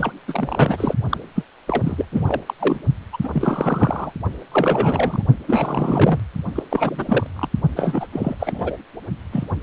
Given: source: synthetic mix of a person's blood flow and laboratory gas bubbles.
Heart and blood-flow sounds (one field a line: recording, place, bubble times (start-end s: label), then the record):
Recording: Doppler ultrasound of blood flow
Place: precordium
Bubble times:
0.00-0.12 s: bubbles
0.28-0.94 s: bubbles
1.09-1.18 s: bubbles
1.35-1.43 s: bubbles
1.67-2.06 s: bubbles
2.12-2.42 s: bubbles
2.46-2.54 s: bubbles
2.59-2.79 s: bubbles
3.12-3.17 s: bubbles
3.23-3.31 s: bubbles
3.33-4.12 s: bubbles
4.51-5.23 s: bubbles
5.46-6.20 s: bubbles
6.55-6.63 s: bubbles
6.70-7.26 s: bubbles
7.35-7.48 s: bubbles
7.76-8.07 s: bubbles
8.12-8.35 s: bubbles
8.40-8.77 s: bubbles
9.32-9.45 s: bubbles
From the record:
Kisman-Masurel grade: 342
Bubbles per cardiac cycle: rolling drumbeat, 9 or more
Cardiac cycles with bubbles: 100%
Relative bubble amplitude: moderate (0.250 to 0.450)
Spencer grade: 3 (all of the cardiac periods contain showers or single bubble signals, but not dominating or overriding the cardiac motion signals)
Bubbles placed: only in the low amplitude regions of the cardiac cycle